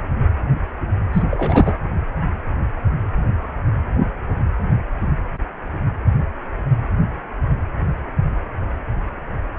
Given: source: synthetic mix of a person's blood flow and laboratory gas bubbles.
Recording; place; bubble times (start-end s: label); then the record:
Doppler ultrasound of blood flow; precordium
1.12-1.22 s: bubbles
1.31-1.74 s: bubbles
From the record:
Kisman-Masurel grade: 213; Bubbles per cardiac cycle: several, 3 to 8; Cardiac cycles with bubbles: 1 to 10%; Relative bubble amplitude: loud (0.450 to 0.775); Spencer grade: 1 (occasional bubble signal discernible with the cardiac motion signal, with majority of cardiac periods free of bubbles); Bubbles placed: anywhere in the cardiac cycle